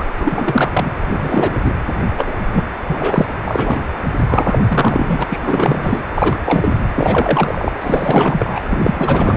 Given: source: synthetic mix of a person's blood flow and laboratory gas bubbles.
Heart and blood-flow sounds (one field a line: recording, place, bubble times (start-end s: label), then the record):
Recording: Doppler ultrasound of blood flow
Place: precordium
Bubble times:
0.00-0.05 s: bubbles
0.18-0.90 s: bubbles
1.07-1.58 s: bubbles
1.64-1.75 s: bubbles
2.18-2.33 s: bubbles
2.53-2.64 s: bubbles
2.88-3.26 s: bubbles
3.47-3.80 s: bubbles
4.29-4.59 s: bubbles
4.68-5.24 s: bubbles
5.29-5.39 s: bubbles
5.42-6.01 s: bubbles
6.14-6.40 s: bubbles
6.45-6.72 s: bubbles
6.93-7.71 s: bubbles
7.81-8.60 s: bubbles
8.70-9.37 s: bubbles
From the record:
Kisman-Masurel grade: 343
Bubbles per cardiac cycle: rolling drumbeat, 9 or more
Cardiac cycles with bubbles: 100%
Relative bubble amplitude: loud (0.450 to 0.775)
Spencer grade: 3 (all of the cardiac periods contain showers or single bubble signals, but not dominating or overriding the cardiac motion signals)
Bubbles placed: anywhere in the cardiac cycle